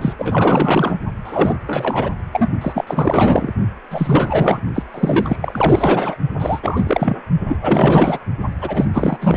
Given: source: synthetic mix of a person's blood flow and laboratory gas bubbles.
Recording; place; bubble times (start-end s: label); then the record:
Doppler ultrasound of blood flow; precordium
0.01-0.13 s: bubbles
0.18-0.98 s: bubbles
1.25-1.61 s: bubbles
1.66-2.10 s: bubbles
2.33-2.49 s: bubbles
2.61-2.85 s: bubbles
2.87-3.51 s: bubbles
3.91-4.59 s: bubbles
4.75-4.83 s: bubbles
4.94-6.15 s: bubbles
6.38-7.19 s: bubbles
7.48-7.57 s: bubbles
7.62-8.19 s: bubbles
8.61-8.85 s: bubbles
8.93-9.17 s: bubbles
9.20-9.37 s: bubbles
From the record:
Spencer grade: 4 (maximum detectable bubble signal sounding continuously throughout systole and diastole of every cardiac period, and overriding the amplitude of the normal cardiac signals); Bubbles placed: only in the low amplitude regions of the cardiac cycle